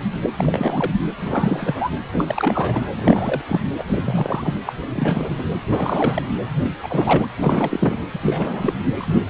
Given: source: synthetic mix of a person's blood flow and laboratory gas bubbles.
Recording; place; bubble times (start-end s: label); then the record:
Doppler ultrasound of blood flow; precordium
0.21-0.30 s: bubbles
0.36-0.94 s: bubbles
1.17-1.91 s: bubbles
2.12-2.86 s: bubbles
2.97-3.42 s: bubbles
3.48-3.60 s: bubbles
3.78-4.60 s: bubbles
4.65-4.73 s: bubbles
4.89-5.36 s: bubbles
5.39-5.44 s: bubbles
5.69-6.33 s: bubbles
6.83-7.28 s: bubbles
7.37-7.99 s: bubbles
8.13-8.19 s: bubbles
8.22-8.73 s: bubbles
8.97-9.19 s: bubbles
From the record:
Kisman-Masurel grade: 343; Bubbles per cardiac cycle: rolling drumbeat, 9 or more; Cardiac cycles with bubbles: 100%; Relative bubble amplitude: loud (0.450 to 0.775); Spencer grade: 3 (all of the cardiac periods contain showers or single bubble signals, but not dominating or overriding the cardiac motion signals); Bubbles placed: anywhere in the cardiac cycle